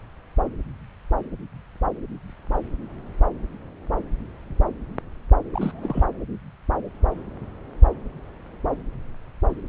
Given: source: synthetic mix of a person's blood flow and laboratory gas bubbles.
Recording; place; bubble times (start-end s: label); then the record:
Doppler ultrasound of blood flow; subclavian vein
5.54-6.04 s: bubbles
From the record:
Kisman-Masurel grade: 211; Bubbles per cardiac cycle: several, 3 to 8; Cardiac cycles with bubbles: 1 to 10%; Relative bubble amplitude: barely perceptible (0.100 to 0.250); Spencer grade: 1 (occasional bubble signal discernible with the cardiac motion signal, with majority of cardiac periods free of bubbles); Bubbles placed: anywhere in the cardiac cycle